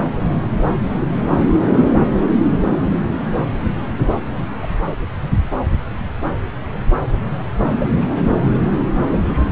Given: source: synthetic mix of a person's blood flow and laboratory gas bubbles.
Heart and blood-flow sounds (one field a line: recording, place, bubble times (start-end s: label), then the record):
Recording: Doppler ultrasound of blood flow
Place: subclavian vein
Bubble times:
1.78-1.91 s: bubbles
1.95-2.09 s: bubbles
2.60-2.71 s: bubbles
4.62-4.67 s: bubbles
7.79-7.88 s: bubbles
8.01-8.23 s: bubbles
9.12-9.17 s: bubbles
From the record:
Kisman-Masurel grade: 121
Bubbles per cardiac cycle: 1 to 2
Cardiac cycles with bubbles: 10 to 50%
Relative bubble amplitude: barely perceptible (0.100 to 0.250)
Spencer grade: 2 (many but less than half of the cardiac periods contain bubble signals, singularly or in groups)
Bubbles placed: anywhere in the cardiac cycle